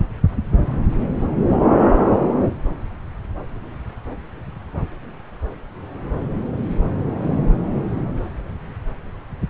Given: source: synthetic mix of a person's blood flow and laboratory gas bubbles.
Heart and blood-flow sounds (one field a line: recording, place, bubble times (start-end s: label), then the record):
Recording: Doppler ultrasound of blood flow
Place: subclavian vein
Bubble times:
no bubbles
From the record:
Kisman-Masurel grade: 000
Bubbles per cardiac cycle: 0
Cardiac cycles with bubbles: 0%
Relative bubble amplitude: no bubbles discernible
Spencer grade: 0 (complete lack of bubble signals)